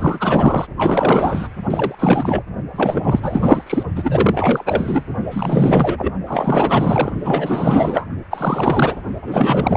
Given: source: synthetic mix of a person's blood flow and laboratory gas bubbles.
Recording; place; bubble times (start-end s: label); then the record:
Doppler ultrasound of blood flow; precordium
0.00-0.67 s: bubbles
0.77-1.47 s: bubbles
1.70-1.95 s: bubbles
1.99-2.42 s: bubbles
2.73-3.83 s: bubbles
3.96-5.03 s: bubbles
5.30-6.12 s: bubbles
6.27-7.11 s: bubbles
7.24-8.06 s: bubbles
8.30-8.96 s: bubbles
9.21-9.77 s: bubbles
From the record:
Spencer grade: 4 (maximum detectable bubble signal sounding continuously throughout systole and diastole of every cardiac period, and overriding the amplitude of the normal cardiac signals); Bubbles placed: only in the low amplitude regions of the cardiac cycle